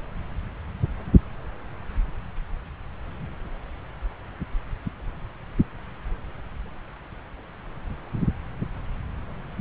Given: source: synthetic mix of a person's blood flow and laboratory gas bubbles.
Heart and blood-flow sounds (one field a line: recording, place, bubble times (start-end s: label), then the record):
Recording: Doppler ultrasound of blood flow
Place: subclavian vein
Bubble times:
no bubbles
From the record:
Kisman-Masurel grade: 000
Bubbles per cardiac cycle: 0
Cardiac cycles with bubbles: 0%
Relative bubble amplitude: no bubbles discernible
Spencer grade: 0 (complete lack of bubble signals)